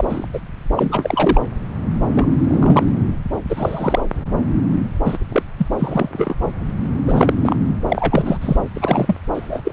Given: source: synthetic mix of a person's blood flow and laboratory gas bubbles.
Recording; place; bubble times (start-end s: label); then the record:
Doppler ultrasound of blood flow; subclavian vein
0.00-0.27 s: bubbles
0.33-0.40 s: bubbles
0.76-1.41 s: bubbles
2.12-2.25 s: bubbles
2.44-2.83 s: bubbles
3.49-4.01 s: bubbles
5.05-5.17 s: bubbles
5.29-5.42 s: bubbles
5.58-5.67 s: bubbles
5.79-6.37 s: bubbles
7.06-7.33 s: bubbles
7.42-7.57 s: bubbles
7.88-8.38 s: bubbles
8.41-8.56 s: bubbles
8.75-9.17 s: bubbles
9.34-9.60 s: bubbles
9.64-9.73 s: bubbles
From the record:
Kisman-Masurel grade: 233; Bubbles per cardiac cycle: several, 3 to 8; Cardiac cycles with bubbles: 50 to 99%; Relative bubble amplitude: loud (0.450 to 0.775); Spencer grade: 3 (all of the cardiac periods contain showers or single bubble signals, but not dominating or overriding the cardiac motion signals); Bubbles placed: anywhere in the cardiac cycle